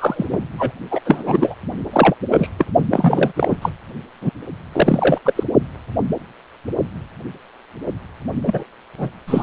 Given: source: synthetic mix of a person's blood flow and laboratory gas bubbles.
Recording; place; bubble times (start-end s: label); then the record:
Doppler ultrasound of blood flow; precordium
0.00-0.48 s: bubbles
0.58-0.72 s: bubbles
0.91-1.00 s: bubbles
1.05-1.55 s: bubbles
1.92-2.15 s: bubbles
2.31-2.50 s: bubbles
2.58-2.65 s: bubbles
2.90-3.32 s: bubbles
3.35-3.57 s: bubbles
3.62-3.70 s: bubbles
4.21-4.30 s: bubbles
4.72-5.18 s: bubbles
5.25-5.43 s: bubbles
8.46-8.63 s: bubbles
8.98-9.10 s: bubbles
9.27-9.43 s: bubbles
From the record:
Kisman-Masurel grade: 333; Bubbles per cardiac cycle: rolling drumbeat, 9 or more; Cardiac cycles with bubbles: 50 to 99%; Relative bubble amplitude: loud (0.450 to 0.775); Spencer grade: 3 (all of the cardiac periods contain showers or single bubble signals, but not dominating or overriding the cardiac motion signals); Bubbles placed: only in the low amplitude regions of the cardiac cycle